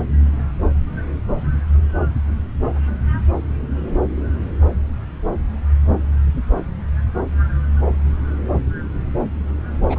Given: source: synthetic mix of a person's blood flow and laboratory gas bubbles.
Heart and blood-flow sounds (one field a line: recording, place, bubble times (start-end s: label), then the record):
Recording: Doppler ultrasound of blood flow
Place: subclavian vein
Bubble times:
9.89-9.99 s: bubbles
From the record:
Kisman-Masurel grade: 211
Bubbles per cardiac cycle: several, 3 to 8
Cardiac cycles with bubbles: 1 to 10%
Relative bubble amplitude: barely perceptible (0.100 to 0.250)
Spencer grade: 1 (occasional bubble signal discernible with the cardiac motion signal, with majority of cardiac periods free of bubbles)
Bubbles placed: anywhere in the cardiac cycle